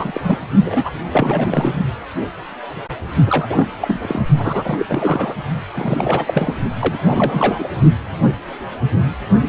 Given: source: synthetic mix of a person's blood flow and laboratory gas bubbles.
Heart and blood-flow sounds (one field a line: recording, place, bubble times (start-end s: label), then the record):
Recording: Doppler ultrasound of blood flow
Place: precordium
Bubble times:
0.00-0.11 s: bubbles
0.14-0.21 s: bubbles
0.23-0.39 s: bubbles
0.65-0.90 s: bubbles
1.12-1.72 s: bubbles
3.27-3.69 s: bubbles
3.80-4.22 s: bubbles
4.38-4.85 s: bubbles
4.88-5.35 s: bubbles
5.76-6.54 s: bubbles
6.80-6.99 s: bubbles
7.05-7.67 s: bubbles
From the record:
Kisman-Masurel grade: 332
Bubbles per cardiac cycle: rolling drumbeat, 9 or more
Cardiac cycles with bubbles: 50 to 99%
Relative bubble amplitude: moderate (0.250 to 0.450)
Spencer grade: 3 (all of the cardiac periods contain showers or single bubble signals, but not dominating or overriding the cardiac motion signals)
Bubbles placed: only in the low amplitude regions of the cardiac cycle